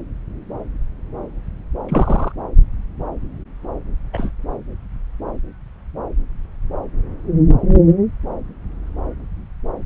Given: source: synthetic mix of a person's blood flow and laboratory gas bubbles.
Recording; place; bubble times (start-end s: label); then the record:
Doppler ultrasound of blood flow; subclavian vein
1.89-2.32 s: bubbles
4.13-4.31 s: bubbles
From the record:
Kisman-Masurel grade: 122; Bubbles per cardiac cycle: 1 to 2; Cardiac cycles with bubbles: 10 to 50%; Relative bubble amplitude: moderate (0.250 to 0.450); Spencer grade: 2 (many but less than half of the cardiac periods contain bubble signals, singularly or in groups); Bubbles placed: anywhere in the cardiac cycle